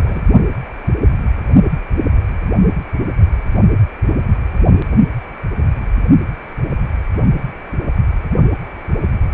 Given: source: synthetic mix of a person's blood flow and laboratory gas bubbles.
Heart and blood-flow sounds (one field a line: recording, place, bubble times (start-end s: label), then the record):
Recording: Doppler ultrasound of blood flow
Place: precordium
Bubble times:
0.00-0.22 s: bubbles
From the record:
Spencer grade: 1 (occasional bubble signal discernible with the cardiac motion signal, with majority of cardiac periods free of bubbles)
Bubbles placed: only in the low amplitude regions of the cardiac cycle